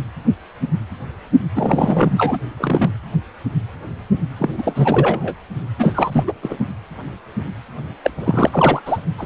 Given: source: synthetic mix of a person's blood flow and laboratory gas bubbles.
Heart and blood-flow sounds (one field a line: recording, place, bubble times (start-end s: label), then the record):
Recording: Doppler ultrasound of blood flow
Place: precordium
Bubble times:
1.55-2.38 s: bubbles
2.57-2.90 s: bubbles
4.39-5.35 s: bubbles
5.79-6.25 s: bubbles
6.27-6.33 s: bubbles
6.43-6.57 s: bubbles
8.03-8.10 s: bubbles
8.18-8.81 s: bubbles
8.85-8.98 s: bubbles
9.18-9.26 s: bubbles
From the record:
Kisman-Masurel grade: 333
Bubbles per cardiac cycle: rolling drumbeat, 9 or more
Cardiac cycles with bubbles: 50 to 99%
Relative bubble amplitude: loud (0.450 to 0.775)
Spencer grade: 3 (all of the cardiac periods contain showers or single bubble signals, but not dominating or overriding the cardiac motion signals)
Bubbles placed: only in the low amplitude regions of the cardiac cycle